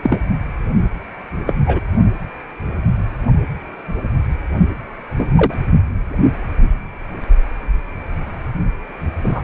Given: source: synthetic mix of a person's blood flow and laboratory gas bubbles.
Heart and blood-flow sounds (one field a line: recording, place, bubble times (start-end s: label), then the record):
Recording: Doppler ultrasound of blood flow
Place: precordium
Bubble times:
0.03-0.18 s: bubbles
1.47-1.54 s: bubbles
1.67-1.80 s: bubbles
5.17-5.54 s: bubbles
9.23-9.42 s: bubbles
From the record:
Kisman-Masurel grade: 123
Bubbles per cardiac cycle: 1 to 2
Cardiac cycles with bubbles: 10 to 50%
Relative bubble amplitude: loud (0.450 to 0.775)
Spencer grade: 2 (many but less than half of the cardiac periods contain bubble signals, singularly or in groups)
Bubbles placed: only in the low amplitude regions of the cardiac cycle